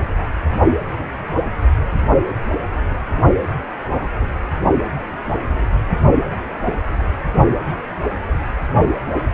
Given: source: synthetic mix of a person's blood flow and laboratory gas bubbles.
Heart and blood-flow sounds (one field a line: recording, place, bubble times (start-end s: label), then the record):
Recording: Doppler ultrasound of blood flow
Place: precordium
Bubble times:
no bubbles
From the record:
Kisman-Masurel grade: 000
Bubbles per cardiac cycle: 0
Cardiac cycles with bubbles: 0%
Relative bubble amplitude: no bubbles discernible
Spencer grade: 0 (complete lack of bubble signals)